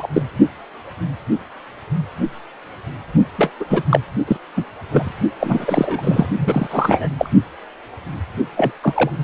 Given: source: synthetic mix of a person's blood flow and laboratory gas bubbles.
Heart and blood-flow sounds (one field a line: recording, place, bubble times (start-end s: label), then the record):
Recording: Doppler ultrasound of blood flow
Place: precordium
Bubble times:
0.00-0.08 s: bubbles
0.13-0.22 s: bubbles
3.38-3.51 s: bubbles
3.60-3.65 s: bubbles
3.69-3.82 s: bubbles
3.89-4.00 s: bubbles
4.27-4.37 s: bubbles
4.56-4.64 s: bubbles
4.89-5.12 s: bubbles
5.40-6.27 s: bubbles
6.38-6.67 s: bubbles
6.70-7.09 s: bubbles
7.18-7.29 s: bubbles
8.56-8.72 s: bubbles
8.82-9.11 s: bubbles
From the record:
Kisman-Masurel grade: 233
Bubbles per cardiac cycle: several, 3 to 8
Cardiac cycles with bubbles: 50 to 99%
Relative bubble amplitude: loud (0.450 to 0.775)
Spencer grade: 3 (all of the cardiac periods contain showers or single bubble signals, but not dominating or overriding the cardiac motion signals)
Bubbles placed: only in the low amplitude regions of the cardiac cycle